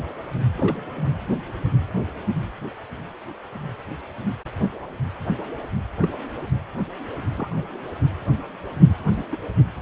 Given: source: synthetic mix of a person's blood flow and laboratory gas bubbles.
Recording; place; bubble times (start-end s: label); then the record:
Doppler ultrasound of blood flow; precordium
0.57-1.10 s: bubbles
6.01-6.08 s: bubbles
7.37-7.49 s: bubbles
7.56-7.62 s: bubbles
9.12-9.26 s: bubbles
9.31-9.37 s: bubbles
From the record:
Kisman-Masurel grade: 121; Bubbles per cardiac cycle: 1 to 2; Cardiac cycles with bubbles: 10 to 50%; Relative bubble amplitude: barely perceptible (0.100 to 0.250); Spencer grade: 2 (many but less than half of the cardiac periods contain bubble signals, singularly or in groups); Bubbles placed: anywhere in the cardiac cycle